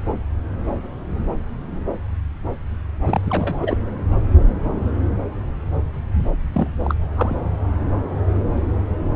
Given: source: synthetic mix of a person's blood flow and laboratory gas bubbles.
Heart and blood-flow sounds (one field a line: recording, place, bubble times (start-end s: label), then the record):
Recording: Doppler ultrasound of blood flow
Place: subclavian vein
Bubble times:
3.04-3.21 s: bubbles
3.25-3.58 s: bubbles
3.61-3.77 s: bubbles
6.53-6.67 s: bubbles
6.83-6.95 s: bubbles
7.16-7.36 s: bubbles
From the record:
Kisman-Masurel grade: 222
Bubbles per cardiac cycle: several, 3 to 8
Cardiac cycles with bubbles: 10 to 50%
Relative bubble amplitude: moderate (0.250 to 0.450)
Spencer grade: 2 (many but less than half of the cardiac periods contain bubble signals, singularly or in groups)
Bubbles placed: anywhere in the cardiac cycle